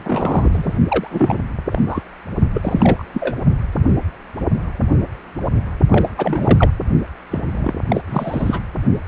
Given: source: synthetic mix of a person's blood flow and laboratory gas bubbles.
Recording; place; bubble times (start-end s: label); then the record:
Doppler ultrasound of blood flow; precordium
0.03-0.78 s: bubbles
0.88-1.07 s: bubbles
1.10-1.42 s: bubbles
1.71-1.82 s: bubbles
1.87-2.03 s: bubbles
2.54-3.04 s: bubbles
3.14-3.35 s: bubbles
5.90-6.09 s: bubbles
6.17-6.70 s: bubbles
7.31-7.75 s: bubbles
7.88-8.01 s: bubbles
8.07-8.60 s: bubbles
From the record:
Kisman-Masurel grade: 332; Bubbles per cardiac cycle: rolling drumbeat, 9 or more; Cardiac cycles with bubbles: 50 to 99%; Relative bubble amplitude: moderate (0.250 to 0.450); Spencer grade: 3 (all of the cardiac periods contain showers or single bubble signals, but not dominating or overriding the cardiac motion signals); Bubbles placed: only in the low amplitude regions of the cardiac cycle